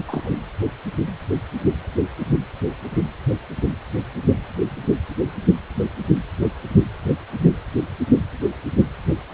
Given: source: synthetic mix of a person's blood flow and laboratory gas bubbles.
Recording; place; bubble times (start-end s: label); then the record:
Doppler ultrasound of blood flow; precordium
0.00-0.04 s: bubbles
0.08-0.32 s: bubbles
From the record:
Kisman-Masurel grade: 222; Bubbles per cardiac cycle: several, 3 to 8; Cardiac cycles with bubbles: 10 to 50%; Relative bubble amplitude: moderate (0.250 to 0.450); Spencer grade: 2 (many but less than half of the cardiac periods contain bubble signals, singularly or in groups); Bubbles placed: anywhere in the cardiac cycle